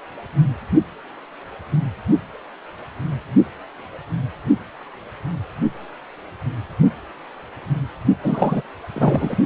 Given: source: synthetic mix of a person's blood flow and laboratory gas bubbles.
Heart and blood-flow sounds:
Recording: Doppler ultrasound of blood flow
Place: precordium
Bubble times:
8.23-8.62 s: bubbles
8.94-9.35 s: bubbles
From the record:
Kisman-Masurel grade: 213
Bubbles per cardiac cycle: several, 3 to 8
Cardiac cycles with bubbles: 1 to 10%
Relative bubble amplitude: loud (0.450 to 0.775)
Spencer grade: 1 (occasional bubble signal discernible with the cardiac motion signal, with majority of cardiac periods free of bubbles)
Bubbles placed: only in the low amplitude regions of the cardiac cycle

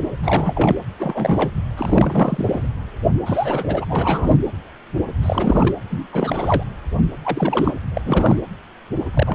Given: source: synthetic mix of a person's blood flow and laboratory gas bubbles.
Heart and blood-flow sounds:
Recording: Doppler ultrasound of blood flow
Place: precordium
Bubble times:
0.23-0.75 s: bubbles
0.99-1.51 s: bubbles
1.77-2.69 s: bubbles
3.26-3.85 s: bubbles
3.88-4.37 s: bubbles
5.22-5.75 s: bubbles
5.90-6.08 s: bubbles
6.12-6.63 s: bubbles
7.25-7.80 s: bubbles
7.94-8.02 s: bubbles
8.05-8.40 s: bubbles
9.13-9.35 s: bubbles
From the record:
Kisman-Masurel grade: 332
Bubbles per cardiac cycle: rolling drumbeat, 9 or more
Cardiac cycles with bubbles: 50 to 99%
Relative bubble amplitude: moderate (0.250 to 0.450)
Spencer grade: 3 (all of the cardiac periods contain showers or single bubble signals, but not dominating or overriding the cardiac motion signals)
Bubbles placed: anywhere in the cardiac cycle

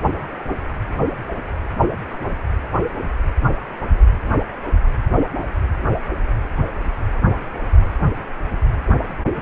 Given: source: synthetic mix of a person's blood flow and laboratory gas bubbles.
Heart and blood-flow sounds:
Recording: Doppler ultrasound of blood flow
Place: precordium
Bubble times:
4.83-4.87 s: bubbles
From the record:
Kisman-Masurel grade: 111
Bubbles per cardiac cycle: 1 to 2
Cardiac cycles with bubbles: 1 to 10%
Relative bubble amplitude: barely perceptible (0.100 to 0.250)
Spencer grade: 1 (occasional bubble signal discernible with the cardiac motion signal, with majority of cardiac periods free of bubbles)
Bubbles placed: anywhere in the cardiac cycle

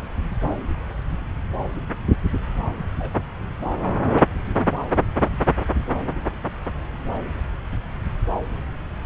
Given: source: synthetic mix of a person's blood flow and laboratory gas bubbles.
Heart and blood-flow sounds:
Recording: Doppler ultrasound of blood flow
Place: subclavian vein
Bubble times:
2.77-2.85 s: bubbles
2.98-3.12 s: bubbles
From the record:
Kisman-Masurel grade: 111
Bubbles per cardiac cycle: 1 to 2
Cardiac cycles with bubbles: 1 to 10%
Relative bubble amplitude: barely perceptible (0.100 to 0.250)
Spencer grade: 1 (occasional bubble signal discernible with the cardiac motion signal, with majority of cardiac periods free of bubbles)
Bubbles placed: anywhere in the cardiac cycle

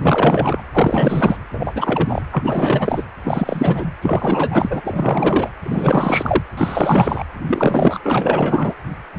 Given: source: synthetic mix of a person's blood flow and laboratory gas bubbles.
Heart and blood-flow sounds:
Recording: Doppler ultrasound of blood flow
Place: precordium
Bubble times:
0.00-0.62 s: bubbles
0.74-1.37 s: bubbles
1.52-2.22 s: bubbles
2.31-3.04 s: bubbles
3.25-3.93 s: bubbles
4.03-4.82 s: bubbles
4.84-5.50 s: bubbles
5.62-6.42 s: bubbles
6.57-7.24 s: bubbles
7.46-7.99 s: bubbles
8.04-8.74 s: bubbles
From the record:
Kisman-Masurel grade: 444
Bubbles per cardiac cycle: continuous sound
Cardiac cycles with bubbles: 100%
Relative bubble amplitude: maximal (0.775 to 0.999)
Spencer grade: 4 (maximum detectable bubble signal sounding continuously throughout systole and diastole of every cardiac period, and overriding the amplitude of the normal cardiac signals)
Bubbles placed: anywhere in the cardiac cycle

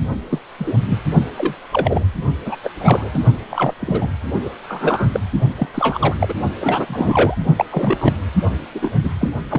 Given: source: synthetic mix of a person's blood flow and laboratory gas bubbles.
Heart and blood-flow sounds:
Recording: Doppler ultrasound of blood flow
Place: precordium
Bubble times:
0.30-0.39 s: bubbles
0.58-0.75 s: bubbles
0.86-0.98 s: bubbles
1.37-1.54 s: bubbles
1.72-2.06 s: bubbles
2.44-2.56 s: bubbles
2.63-2.70 s: bubbles
2.80-3.09 s: bubbles
3.13-3.19 s: bubbles
3.50-3.74 s: bubbles
3.79-4.10 s: bubbles
4.45-4.50 s: bubbles
4.67-5.10 s: bubbles
5.13-5.20 s: bubbles
5.56-5.67 s: bubbles
5.74-6.16 s: bubbles
6.20-6.34 s: bubbles
6.60-7.36 s: bubbles
7.57-7.65 s: bubbles
7.71-8.17 s: bubbles
8.74-8.90 s: bubbles
9.04-9.13 s: bubbles
9.21-9.30 s: bubbles
9.49-9.59 s: bubbles
From the record:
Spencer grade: 3 (all of the cardiac periods contain showers or single bubble signals, but not dominating or overriding the cardiac motion signals)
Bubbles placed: only in the low amplitude regions of the cardiac cycle

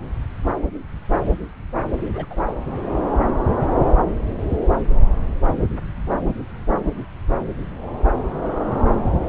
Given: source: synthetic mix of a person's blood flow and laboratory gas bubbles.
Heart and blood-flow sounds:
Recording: Doppler ultrasound of blood flow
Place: subclavian vein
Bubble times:
1.97-2.09 s: bubbles
2.13-2.26 s: bubbles
2.30-2.42 s: bubbles
2.46-2.54 s: bubbles
From the record:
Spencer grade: 1 (occasional bubble signal discernible with the cardiac motion signal, with majority of cardiac periods free of bubbles)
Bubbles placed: anywhere in the cardiac cycle

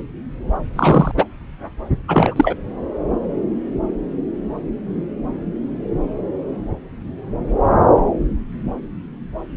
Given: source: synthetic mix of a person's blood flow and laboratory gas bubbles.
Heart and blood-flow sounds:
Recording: Doppler ultrasound of blood flow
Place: subclavian vein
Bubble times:
0.76-1.11 s: bubbles
1.16-1.24 s: bubbles
2.07-2.55 s: bubbles
From the record:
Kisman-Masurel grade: 213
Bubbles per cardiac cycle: several, 3 to 8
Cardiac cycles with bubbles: 1 to 10%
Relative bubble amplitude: loud (0.450 to 0.775)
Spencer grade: 1 (occasional bubble signal discernible with the cardiac motion signal, with majority of cardiac periods free of bubbles)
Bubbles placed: anywhere in the cardiac cycle

